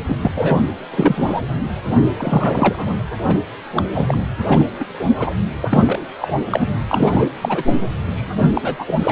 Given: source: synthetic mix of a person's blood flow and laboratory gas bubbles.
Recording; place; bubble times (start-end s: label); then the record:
Doppler ultrasound of blood flow; precordium
0.08-0.17 s: bubbles
0.24-0.30 s: bubbles
0.35-0.58 s: bubbles
0.91-1.41 s: bubbles
1.90-1.96 s: bubbles
2.17-2.94 s: bubbles
3.24-3.39 s: bubbles
3.76-3.82 s: bubbles
3.93-4.18 s: bubbles
4.46-4.64 s: bubbles
4.79-4.85 s: bubbles
5.19-5.34 s: bubbles
5.61-6.00 s: bubbles
6.20-6.33 s: bubbles
6.50-6.68 s: bubbles
6.88-7.28 s: bubbles
7.41-7.63 s: bubbles
8.15-8.49 s: bubbles
8.54-8.76 s: bubbles
8.79-8.93 s: bubbles
9.03-9.12 s: bubbles
From the record:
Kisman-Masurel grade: 243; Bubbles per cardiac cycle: several, 3 to 8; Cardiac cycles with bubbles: 100%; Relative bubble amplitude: loud (0.450 to 0.775); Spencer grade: 3 (all of the cardiac periods contain showers or single bubble signals, but not dominating or overriding the cardiac motion signals); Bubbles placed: anywhere in the cardiac cycle